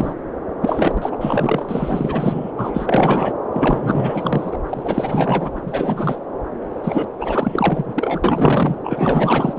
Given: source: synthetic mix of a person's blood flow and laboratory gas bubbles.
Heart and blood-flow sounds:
Doppler ultrasound of blood flow; subclavian vein
0.00-0.14 s: bubbles
0.61-1.17 s: bubbles
1.20-2.52 s: bubbles
2.57-3.33 s: bubbles
3.52-4.56 s: bubbles
4.70-5.50 s: bubbles
5.54-5.62 s: bubbles
5.66-6.19 s: bubbles
6.83-7.08 s: bubbles
7.18-8.21 s: bubbles
8.23-8.75 s: bubbles
8.83-9.59 s: bubbles
From the record:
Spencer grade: 4 (maximum detectable bubble signal sounding continuously throughout systole and diastole of every cardiac period, and overriding the amplitude of the normal cardiac signals); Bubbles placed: anywhere in the cardiac cycle

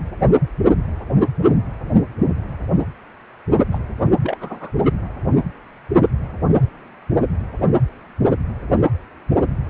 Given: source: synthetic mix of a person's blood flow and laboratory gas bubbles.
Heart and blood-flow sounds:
Doppler ultrasound of blood flow; precordium
3.71-3.79 s: bubbles
4.22-4.37 s: bubbles
4.41-4.72 s: bubbles
From the record:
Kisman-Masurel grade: 221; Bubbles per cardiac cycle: several, 3 to 8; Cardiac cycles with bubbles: 10 to 50%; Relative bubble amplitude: barely perceptible (0.100 to 0.250); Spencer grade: 2 (many but less than half of the cardiac periods contain bubble signals, singularly or in groups); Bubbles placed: only in the low amplitude regions of the cardiac cycle

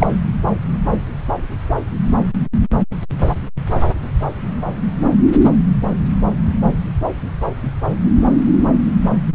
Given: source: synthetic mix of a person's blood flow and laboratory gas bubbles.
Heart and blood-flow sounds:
Doppler ultrasound of blood flow; subclavian vein
0.00-0.07 s: bubbles
From the record:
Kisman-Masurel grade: 113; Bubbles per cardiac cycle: 1 to 2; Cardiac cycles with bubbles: 1 to 10%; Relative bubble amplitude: loud (0.450 to 0.775); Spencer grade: 1 (occasional bubble signal discernible with the cardiac motion signal, with majority of cardiac periods free of bubbles); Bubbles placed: anywhere in the cardiac cycle

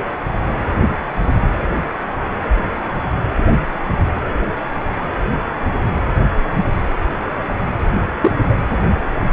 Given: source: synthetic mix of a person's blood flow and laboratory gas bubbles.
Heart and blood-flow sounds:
Doppler ultrasound of blood flow; precordium
8.21-8.32 s: bubbles
8.48-8.55 s: bubbles
From the record:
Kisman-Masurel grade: 113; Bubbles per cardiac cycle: 1 to 2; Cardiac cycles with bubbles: 1 to 10%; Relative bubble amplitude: loud (0.450 to 0.775); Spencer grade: 1 (occasional bubble signal discernible with the cardiac motion signal, with majority of cardiac periods free of bubbles); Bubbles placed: anywhere in the cardiac cycle

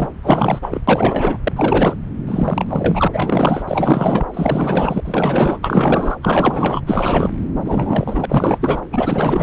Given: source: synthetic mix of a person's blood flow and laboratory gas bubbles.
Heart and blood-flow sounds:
Doppler ultrasound of blood flow; subclavian vein
0.00-0.09 s: bubbles
0.22-0.81 s: bubbles
0.88-1.39 s: bubbles
1.44-1.52 s: bubbles
1.55-1.96 s: bubbles
2.27-3.08 s: bubbles
3.12-3.64 s: bubbles
3.67-4.25 s: bubbles
4.33-5.00 s: bubbles
5.04-5.58 s: bubbles
5.63-6.16 s: bubbles
6.23-6.81 s: bubbles
6.87-7.33 s: bubbles
7.65-8.25 s: bubbles
8.29-8.81 s: bubbles
8.91-9.43 s: bubbles
From the record:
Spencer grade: 4 (maximum detectable bubble signal sounding continuously throughout systole and diastole of every cardiac period, and overriding the amplitude of the normal cardiac signals); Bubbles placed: anywhere in the cardiac cycle

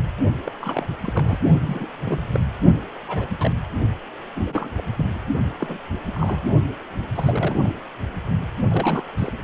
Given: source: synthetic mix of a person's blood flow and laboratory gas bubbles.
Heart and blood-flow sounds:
Doppler ultrasound of blood flow; precordium
0.44-0.52 s: bubbles
0.59-0.85 s: bubbles
1.03-1.39 s: bubbles
1.65-1.87 s: bubbles
2.04-2.20 s: bubbles
2.32-2.40 s: bubbles
3.08-3.27 s: bubbles
3.40-3.52 s: bubbles
4.34-4.82 s: bubbles
4.96-5.06 s: bubbles
5.59-5.78 s: bubbles
6.13-6.42 s: bubbles
7.15-7.72 s: bubbles
8.69-9.04 s: bubbles
9.17-9.33 s: bubbles
From the record:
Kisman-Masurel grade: 242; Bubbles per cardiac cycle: several, 3 to 8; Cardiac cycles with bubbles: 100%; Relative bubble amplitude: moderate (0.250 to 0.450); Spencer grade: 3 (all of the cardiac periods contain showers or single bubble signals, but not dominating or overriding the cardiac motion signals); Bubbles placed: only in the low amplitude regions of the cardiac cycle

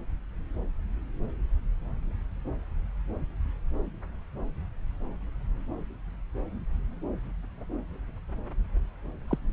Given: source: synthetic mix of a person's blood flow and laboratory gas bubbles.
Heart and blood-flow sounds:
Doppler ultrasound of blood flow; subclavian vein
9.27-9.38 s: bubbles
From the record:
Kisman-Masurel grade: 111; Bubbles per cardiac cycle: 1 to 2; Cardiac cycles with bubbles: 1 to 10%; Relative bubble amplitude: barely perceptible (0.100 to 0.250); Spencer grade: 1 (occasional bubble signal discernible with the cardiac motion signal, with majority of cardiac periods free of bubbles); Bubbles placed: anywhere in the cardiac cycle

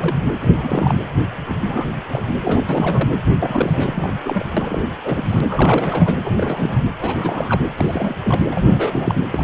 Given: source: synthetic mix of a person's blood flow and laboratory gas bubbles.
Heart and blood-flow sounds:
Doppler ultrasound of blood flow; precordium
0.00-0.17 s: bubbles
0.41-0.98 s: bubbles
1.48-1.54 s: bubbles
1.64-1.88 s: bubbles
2.10-2.38 s: bubbles
2.41-2.64 s: bubbles
2.69-3.10 s: bubbles
3.40-4.15 s: bubbles
4.24-4.43 s: bubbles
4.57-4.83 s: bubbles
5.04-5.41 s: bubbles
5.47-6.17 s: bubbles
6.24-6.83 s: bubbles
7.00-7.61 s: bubbles
7.77-8.14 s: bubbles
8.23-8.46 s: bubbles
8.51-9.14 s: bubbles
9.31-9.44 s: bubbles
From the record:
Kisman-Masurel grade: 342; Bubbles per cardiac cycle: rolling drumbeat, 9 or more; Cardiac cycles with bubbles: 100%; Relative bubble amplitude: moderate (0.250 to 0.450); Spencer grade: 3 (all of the cardiac periods contain showers or single bubble signals, but not dominating or overriding the cardiac motion signals); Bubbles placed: anywhere in the cardiac cycle

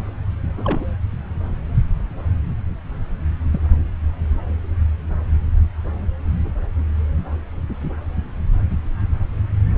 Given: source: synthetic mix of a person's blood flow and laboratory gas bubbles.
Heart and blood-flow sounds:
Doppler ultrasound of blood flow; subclavian vein
0.56-0.85 s: bubbles
3.52-3.60 s: bubbles
From the record:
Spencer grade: 2 (many but less than half of the cardiac periods contain bubble signals, singularly or in groups); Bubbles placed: anywhere in the cardiac cycle

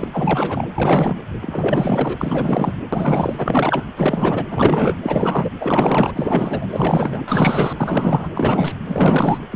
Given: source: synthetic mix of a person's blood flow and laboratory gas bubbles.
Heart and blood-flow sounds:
Doppler ultrasound of blood flow; precordium
0.00-0.67 s: bubbles
0.75-1.16 s: bubbles
1.42-2.73 s: bubbles
2.92-3.85 s: bubbles
3.96-4.45 s: bubbles
4.50-4.96 s: bubbles
5.03-5.50 s: bubbles
5.60-6.67 s: bubbles
6.70-7.24 s: bubbles
7.28-7.73 s: bubbles
7.77-8.29 s: bubbles
8.34-8.81 s: bubbles
8.86-9.39 s: bubbles
9.50-9.56 s: bubbles
From the record:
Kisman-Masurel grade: 444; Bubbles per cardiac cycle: continuous sound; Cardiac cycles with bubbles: 100%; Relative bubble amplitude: maximal (0.775 to 0.999); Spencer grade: 4 (maximum detectable bubble signal sounding continuously throughout systole and diastole of every cardiac period, and overriding the amplitude of the normal cardiac signals); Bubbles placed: anywhere in the cardiac cycle

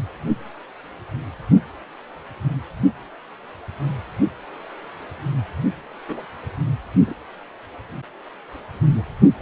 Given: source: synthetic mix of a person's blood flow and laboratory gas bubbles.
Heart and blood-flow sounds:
Doppler ultrasound of blood flow; precordium
6.08-6.25 s: bubbles
7.06-7.13 s: bubbles
8.98-9.04 s: bubbles
From the record:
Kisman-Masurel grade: 121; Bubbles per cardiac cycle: 1 to 2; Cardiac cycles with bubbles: 10 to 50%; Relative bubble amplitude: barely perceptible (0.100 to 0.250); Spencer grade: 2 (many but less than half of the cardiac periods contain bubble signals, singularly or in groups); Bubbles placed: only in the low amplitude regions of the cardiac cycle

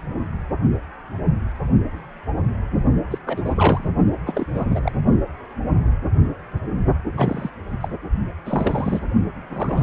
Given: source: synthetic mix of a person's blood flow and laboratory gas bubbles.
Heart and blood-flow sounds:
Doppler ultrasound of blood flow; precordium
3.10-3.19 s: bubbles
3.26-3.42 s: bubbles
3.45-3.88 s: bubbles
4.26-4.46 s: bubbles
4.54-4.92 s: bubbles
7.14-7.50 s: bubbles
7.71-7.77 s: bubbles
7.81-7.88 s: bubbles
8.46-9.04 s: bubbles
9.49-9.83 s: bubbles
From the record:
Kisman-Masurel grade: 332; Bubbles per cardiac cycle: rolling drumbeat, 9 or more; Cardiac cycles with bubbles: 50 to 99%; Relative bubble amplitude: moderate (0.250 to 0.450); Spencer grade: 3 (all of the cardiac periods contain showers or single bubble signals, but not dominating or overriding the cardiac motion signals); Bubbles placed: only in the low amplitude regions of the cardiac cycle

